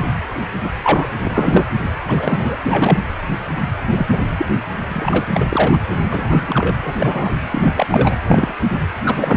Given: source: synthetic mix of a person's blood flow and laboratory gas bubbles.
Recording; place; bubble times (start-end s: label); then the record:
Doppler ultrasound of blood flow; precordium
0.64-0.69 s: bubbles
0.83-1.07 s: bubbles
1.24-1.66 s: bubbles
2.06-2.56 s: bubbles
2.64-3.00 s: bubbles
3.96-4.07 s: bubbles
4.12-4.19 s: bubbles
4.38-4.46 s: bubbles
4.92-5.25 s: bubbles
5.33-5.78 s: bubbles
6.10-6.93 s: bubbles
7.00-7.30 s: bubbles
7.51-7.87 s: bubbles
7.90-8.16 s: bubbles
8.27-8.52 s: bubbles
9.04-9.37 s: bubbles
From the record:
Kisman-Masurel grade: 233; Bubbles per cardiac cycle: several, 3 to 8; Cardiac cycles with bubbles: 50 to 99%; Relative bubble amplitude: loud (0.450 to 0.775); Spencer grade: 3 (all of the cardiac periods contain showers or single bubble signals, but not dominating or overriding the cardiac motion signals); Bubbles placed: anywhere in the cardiac cycle